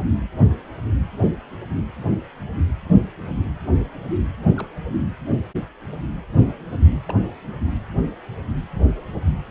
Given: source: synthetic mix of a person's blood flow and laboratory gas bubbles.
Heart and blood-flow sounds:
Doppler ultrasound of blood flow; precordium
4.56-4.67 s: bubbles
7.08-7.14 s: bubbles
From the record:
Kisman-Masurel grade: 121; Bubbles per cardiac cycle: 1 to 2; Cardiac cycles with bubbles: 10 to 50%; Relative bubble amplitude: barely perceptible (0.100 to 0.250); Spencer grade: 2 (many but less than half of the cardiac periods contain bubble signals, singularly or in groups); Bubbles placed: anywhere in the cardiac cycle

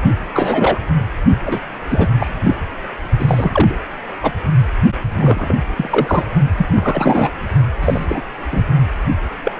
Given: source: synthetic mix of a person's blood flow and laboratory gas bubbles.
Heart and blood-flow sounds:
Doppler ultrasound of blood flow; precordium
0.34-0.79 s: bubbles
1.46-1.60 s: bubbles
1.90-2.08 s: bubbles
2.19-2.55 s: bubbles
3.19-3.75 s: bubbles
4.23-4.32 s: bubbles
5.18-5.55 s: bubbles
5.76-6.25 s: bubbles
6.58-6.67 s: bubbles
6.75-7.47 s: bubbles
7.80-8.05 s: bubbles
8.09-8.22 s: bubbles
8.52-8.62 s: bubbles
9.45-9.52 s: bubbles
From the record:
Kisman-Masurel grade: 243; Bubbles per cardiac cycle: several, 3 to 8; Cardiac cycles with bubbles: 100%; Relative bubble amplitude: loud (0.450 to 0.775); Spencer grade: 3 (all of the cardiac periods contain showers or single bubble signals, but not dominating or overriding the cardiac motion signals); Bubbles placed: only in the low amplitude regions of the cardiac cycle

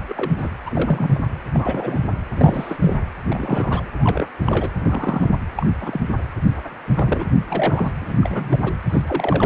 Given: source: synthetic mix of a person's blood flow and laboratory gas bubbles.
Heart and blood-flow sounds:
Doppler ultrasound of blood flow; precordium
0.00-0.49 s: bubbles
0.66-1.24 s: bubbles
1.53-2.03 s: bubbles
2.35-2.97 s: bubbles
3.30-3.83 s: bubbles
3.98-4.27 s: bubbles
4.45-4.69 s: bubbles
4.80-5.30 s: bubbles
5.56-5.66 s: bubbles
5.80-6.01 s: bubbles
6.96-7.25 s: bubbles
7.48-7.92 s: bubbles
8.00-8.18 s: bubbles
8.21-8.59 s: bubbles
8.63-8.72 s: bubbles
8.89-9.02 s: bubbles
9.06-9.46 s: bubbles
From the record:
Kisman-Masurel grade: 242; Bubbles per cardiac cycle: several, 3 to 8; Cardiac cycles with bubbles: 100%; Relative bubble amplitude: moderate (0.250 to 0.450); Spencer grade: 3 (all of the cardiac periods contain showers or single bubble signals, but not dominating or overriding the cardiac motion signals); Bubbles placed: anywhere in the cardiac cycle

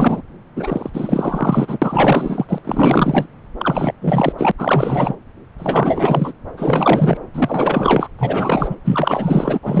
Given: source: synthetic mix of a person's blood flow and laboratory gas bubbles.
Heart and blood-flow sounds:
Doppler ultrasound of blood flow; subclavian vein
0.00-0.22 s: bubbles
0.56-0.90 s: bubbles
0.93-1.78 s: bubbles
1.81-2.59 s: bubbles
2.64-3.26 s: bubbles
3.59-3.93 s: bubbles
4.01-4.33 s: bubbles
4.38-4.51 s: bubbles
4.58-5.15 s: bubbles
5.58-6.33 s: bubbles
6.57-7.17 s: bubbles
7.33-8.08 s: bubbles
8.18-8.77 s: bubbles
8.85-9.59 s: bubbles
9.62-9.80 s: bubbles
From the record:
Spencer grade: 4 (maximum detectable bubble signal sounding continuously throughout systole and diastole of every cardiac period, and overriding the amplitude of the normal cardiac signals); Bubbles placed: anywhere in the cardiac cycle

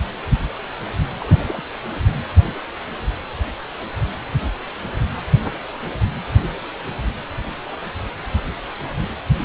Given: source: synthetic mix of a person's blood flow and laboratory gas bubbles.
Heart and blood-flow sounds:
Doppler ultrasound of blood flow; precordium
1.19-1.44 s: bubbles
1.48-1.62 s: bubbles
From the record:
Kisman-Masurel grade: 111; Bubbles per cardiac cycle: 1 to 2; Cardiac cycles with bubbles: 1 to 10%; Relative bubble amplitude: barely perceptible (0.100 to 0.250); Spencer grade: 1 (occasional bubble signal discernible with the cardiac motion signal, with majority of cardiac periods free of bubbles); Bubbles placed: anywhere in the cardiac cycle

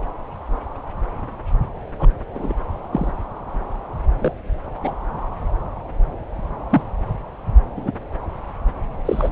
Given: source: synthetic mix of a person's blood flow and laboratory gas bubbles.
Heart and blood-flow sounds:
Doppler ultrasound of blood flow; subclavian vein
1.98-2.16 s: bubbles
2.34-2.53 s: bubbles
2.92-3.11 s: bubbles
4.19-4.33 s: bubbles
4.83-4.94 s: bubbles
6.69-6.82 s: bubbles
7.76-7.92 s: bubbles
9.05-9.29 s: bubbles
From the record:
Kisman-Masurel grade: 122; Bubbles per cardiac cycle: 1 to 2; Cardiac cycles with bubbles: 10 to 50%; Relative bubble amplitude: moderate (0.250 to 0.450); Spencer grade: 2 (many but less than half of the cardiac periods contain bubble signals, singularly or in groups); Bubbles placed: anywhere in the cardiac cycle

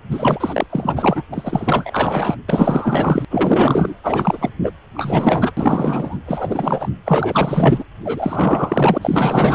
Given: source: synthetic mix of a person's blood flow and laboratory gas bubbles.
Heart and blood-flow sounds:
Doppler ultrasound of blood flow; precordium
0.10-0.66 s: bubbles
0.69-1.23 s: bubbles
1.32-2.36 s: bubbles
2.48-3.25 s: bubbles
3.30-3.94 s: bubbles
4.03-4.50 s: bubbles
4.62-4.73 s: bubbles
4.95-5.52 s: bubbles
5.57-6.18 s: bubbles
6.26-6.89 s: bubbles
7.05-7.84 s: bubbles
8.04-8.98 s: bubbles
9.01-9.55 s: bubbles
From the record:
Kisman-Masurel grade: 444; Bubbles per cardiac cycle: continuous sound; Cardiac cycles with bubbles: 100%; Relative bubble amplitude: maximal (0.775 to 0.999); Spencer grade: 4 (maximum detectable bubble signal sounding continuously throughout systole and diastole of every cardiac period, and overriding the amplitude of the normal cardiac signals); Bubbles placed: anywhere in the cardiac cycle

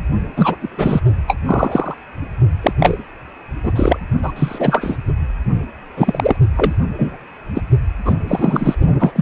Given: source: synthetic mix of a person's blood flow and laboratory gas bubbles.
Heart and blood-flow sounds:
Doppler ultrasound of blood flow; precordium
0.36-0.56 s: bubbles
0.61-1.00 s: bubbles
1.27-1.37 s: bubbles
1.47-1.95 s: bubbles
2.62-2.73 s: bubbles
2.79-3.02 s: bubbles
3.64-3.72 s: bubbles
3.76-3.98 s: bubbles
4.22-4.33 s: bubbles
4.36-4.96 s: bubbles
5.96-6.36 s: bubbles
6.55-6.73 s: bubbles
6.98-7.17 s: bubbles
7.54-7.61 s: bubbles
8.05-8.13 s: bubbles
8.28-8.75 s: bubbles
9.00-9.12 s: bubbles
9.15-9.22 s: bubbles
From the record:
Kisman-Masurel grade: 243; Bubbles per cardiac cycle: several, 3 to 8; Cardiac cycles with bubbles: 100%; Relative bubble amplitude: loud (0.450 to 0.775); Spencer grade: 3 (all of the cardiac periods contain showers or single bubble signals, but not dominating or overriding the cardiac motion signals); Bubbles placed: only in the low amplitude regions of the cardiac cycle

